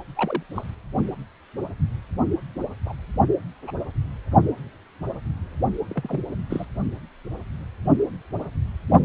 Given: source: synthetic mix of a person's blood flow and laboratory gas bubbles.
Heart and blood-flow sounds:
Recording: Doppler ultrasound of blood flow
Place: precordium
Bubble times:
0.15-0.43 s: bubbles
0.55-0.64 s: bubbles
2.85-2.94 s: bubbles
3.67-3.71 s: bubbles
5.88-6.21 s: bubbles
6.50-6.66 s: bubbles
From the record:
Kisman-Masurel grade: 121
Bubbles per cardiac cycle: 1 to 2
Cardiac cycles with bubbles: 10 to 50%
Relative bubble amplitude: barely perceptible (0.100 to 0.250)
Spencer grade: 2 (many but less than half of the cardiac periods contain bubble signals, singularly or in groups)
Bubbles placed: only in the low amplitude regions of the cardiac cycle

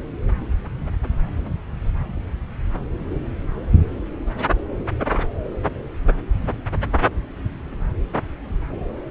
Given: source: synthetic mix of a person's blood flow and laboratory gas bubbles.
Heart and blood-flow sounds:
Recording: Doppler ultrasound of blood flow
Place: subclavian vein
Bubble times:
no bubbles
From the record:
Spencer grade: 0 (complete lack of bubble signals)

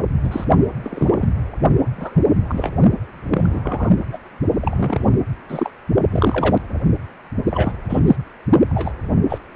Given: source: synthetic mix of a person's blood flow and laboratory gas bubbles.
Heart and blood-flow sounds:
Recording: Doppler ultrasound of blood flow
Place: precordium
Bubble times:
0.24-0.45 s: bubbles
0.82-1.29 s: bubbles
1.96-2.21 s: bubbles
2.48-2.73 s: bubbles
3.31-3.60 s: bubbles
3.63-3.91 s: bubbles
4.12-4.18 s: bubbles
4.60-5.08 s: bubbles
5.48-5.71 s: bubbles
6.10-6.57 s: bubbles
7.45-7.72 s: bubbles
7.89-8.00 s: bubbles
8.07-8.16 s: bubbles
8.70-8.94 s: bubbles
9.29-9.39 s: bubbles
From the record:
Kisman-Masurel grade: 243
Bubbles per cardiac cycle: several, 3 to 8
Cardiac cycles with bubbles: 100%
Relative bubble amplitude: loud (0.450 to 0.775)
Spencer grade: 3 (all of the cardiac periods contain showers or single bubble signals, but not dominating or overriding the cardiac motion signals)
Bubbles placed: only in the low amplitude regions of the cardiac cycle

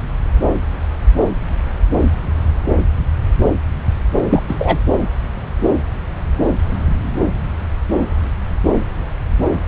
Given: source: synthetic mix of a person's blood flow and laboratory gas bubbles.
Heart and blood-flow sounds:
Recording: Doppler ultrasound of blood flow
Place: subclavian vein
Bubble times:
4.29-4.42 s: bubbles
4.48-4.79 s: bubbles
From the record:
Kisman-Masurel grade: 213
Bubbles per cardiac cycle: several, 3 to 8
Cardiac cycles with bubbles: 1 to 10%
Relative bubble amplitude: loud (0.450 to 0.775)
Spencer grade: 1 (occasional bubble signal discernible with the cardiac motion signal, with majority of cardiac periods free of bubbles)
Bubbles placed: anywhere in the cardiac cycle

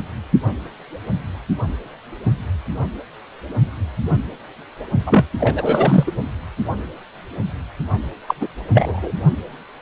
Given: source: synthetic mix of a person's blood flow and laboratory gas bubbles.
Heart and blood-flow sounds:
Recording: Doppler ultrasound of blood flow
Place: precordium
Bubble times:
0.00-0.03 s: bubbles
5.06-5.27 s: bubbles
5.40-6.12 s: bubbles
8.27-8.34 s: bubbles
8.40-8.48 s: bubbles
8.72-9.12 s: bubbles
From the record:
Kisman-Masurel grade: 223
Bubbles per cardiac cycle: several, 3 to 8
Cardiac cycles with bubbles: 10 to 50%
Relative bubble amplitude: loud (0.450 to 0.775)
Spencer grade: 2 (many but less than half of the cardiac periods contain bubble signals, singularly or in groups)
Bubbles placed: only in the low amplitude regions of the cardiac cycle

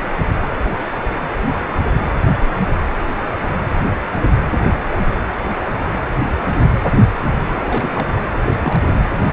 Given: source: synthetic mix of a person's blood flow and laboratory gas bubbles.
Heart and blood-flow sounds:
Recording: Doppler ultrasound of blood flow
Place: precordium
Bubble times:
7.49-8.08 s: bubbles
8.46-8.79 s: bubbles
From the record:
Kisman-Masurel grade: 221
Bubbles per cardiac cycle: several, 3 to 8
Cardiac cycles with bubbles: 10 to 50%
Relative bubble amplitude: barely perceptible (0.100 to 0.250)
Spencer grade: 2 (many but less than half of the cardiac periods contain bubble signals, singularly or in groups)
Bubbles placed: anywhere in the cardiac cycle

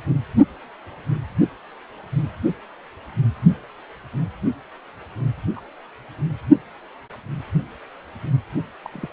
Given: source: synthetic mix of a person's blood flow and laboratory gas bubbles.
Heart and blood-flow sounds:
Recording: Doppler ultrasound of blood flow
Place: precordium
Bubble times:
5.55-5.60 s: bubbles
8.84-9.08 s: bubbles
From the record:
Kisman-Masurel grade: 121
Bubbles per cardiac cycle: 1 to 2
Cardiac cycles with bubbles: 10 to 50%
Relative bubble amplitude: barely perceptible (0.100 to 0.250)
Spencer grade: 2 (many but less than half of the cardiac periods contain bubble signals, singularly or in groups)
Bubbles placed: only in the low amplitude regions of the cardiac cycle

